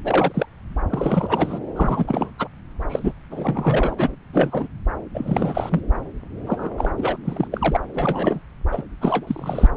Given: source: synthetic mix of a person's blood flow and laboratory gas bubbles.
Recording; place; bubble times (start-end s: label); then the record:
Doppler ultrasound of blood flow; subclavian vein
0.04-0.46 s: bubbles
0.90-1.59 s: bubbles
1.75-2.31 s: bubbles
2.39-2.49 s: bubbles
2.89-3.12 s: bubbles
3.31-3.95 s: bubbles
3.98-4.16 s: bubbles
4.33-4.67 s: bubbles
5.14-5.81 s: bubbles
6.46-6.70 s: bubbles
6.78-6.91 s: bubbles
6.96-7.17 s: bubbles
7.25-7.48 s: bubbles
7.52-7.77 s: bubbles
7.94-8.39 s: bubbles
8.71-8.83 s: bubbles
9.01-9.68 s: bubbles
From the record:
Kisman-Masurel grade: 342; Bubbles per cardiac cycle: rolling drumbeat, 9 or more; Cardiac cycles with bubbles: 100%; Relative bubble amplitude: moderate (0.250 to 0.450); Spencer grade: 3 (all of the cardiac periods contain showers or single bubble signals, but not dominating or overriding the cardiac motion signals); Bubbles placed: anywhere in the cardiac cycle